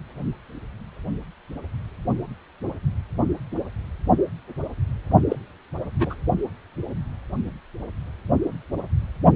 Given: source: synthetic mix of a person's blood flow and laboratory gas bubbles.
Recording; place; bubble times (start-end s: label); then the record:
Doppler ultrasound of blood flow; precordium
5.28-5.36 s: bubbles
5.99-6.16 s: bubbles
From the record:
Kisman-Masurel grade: 212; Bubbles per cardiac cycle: several, 3 to 8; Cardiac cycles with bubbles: 1 to 10%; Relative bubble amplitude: moderate (0.250 to 0.450); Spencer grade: 1 (occasional bubble signal discernible with the cardiac motion signal, with majority of cardiac periods free of bubbles); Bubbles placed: only in the low amplitude regions of the cardiac cycle